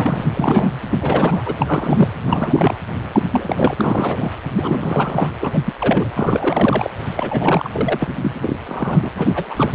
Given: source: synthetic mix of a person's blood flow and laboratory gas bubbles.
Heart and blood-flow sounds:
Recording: Doppler ultrasound of blood flow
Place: precordium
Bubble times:
0.00-0.29 s: bubbles
0.37-0.74 s: bubbles
0.89-1.54 s: bubbles
1.57-2.12 s: bubbles
2.26-2.76 s: bubbles
3.12-3.20 s: bubbles
3.31-3.74 s: bubbles
3.76-4.32 s: bubbles
4.56-5.29 s: bubbles
5.40-5.60 s: bubbles
5.64-5.73 s: bubbles
5.79-6.11 s: bubbles
6.14-6.90 s: bubbles
7.17-8.12 s: bubbles
8.22-8.31 s: bubbles
8.34-8.40 s: bubbles
8.42-8.56 s: bubbles
8.69-9.09 s: bubbles
9.15-9.75 s: bubbles
From the record:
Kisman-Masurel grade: 342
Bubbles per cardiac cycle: rolling drumbeat, 9 or more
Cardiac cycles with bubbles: 100%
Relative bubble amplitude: moderate (0.250 to 0.450)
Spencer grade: 3 (all of the cardiac periods contain showers or single bubble signals, but not dominating or overriding the cardiac motion signals)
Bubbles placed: anywhere in the cardiac cycle

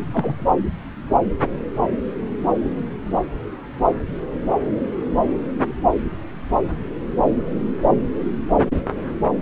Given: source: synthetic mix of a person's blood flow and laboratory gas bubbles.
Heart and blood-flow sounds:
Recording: Doppler ultrasound of blood flow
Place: subclavian vein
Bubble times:
0.12-0.47 s: bubbles
From the record:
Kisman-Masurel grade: 112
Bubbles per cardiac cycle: 1 to 2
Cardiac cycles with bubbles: 1 to 10%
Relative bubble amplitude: moderate (0.250 to 0.450)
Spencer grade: 1 (occasional bubble signal discernible with the cardiac motion signal, with majority of cardiac periods free of bubbles)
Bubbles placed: anywhere in the cardiac cycle

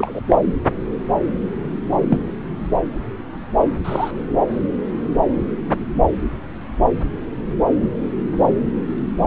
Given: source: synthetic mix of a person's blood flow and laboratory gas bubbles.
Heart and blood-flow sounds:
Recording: Doppler ultrasound of blood flow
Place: subclavian vein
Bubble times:
0.00-0.20 s: bubbles
0.26-0.39 s: bubbles
2.09-2.17 s: bubbles
3.84-4.11 s: bubbles
From the record:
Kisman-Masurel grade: 123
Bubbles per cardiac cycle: 1 to 2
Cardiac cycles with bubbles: 10 to 50%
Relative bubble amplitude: loud (0.450 to 0.775)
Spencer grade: 2 (many but less than half of the cardiac periods contain bubble signals, singularly or in groups)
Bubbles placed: anywhere in the cardiac cycle

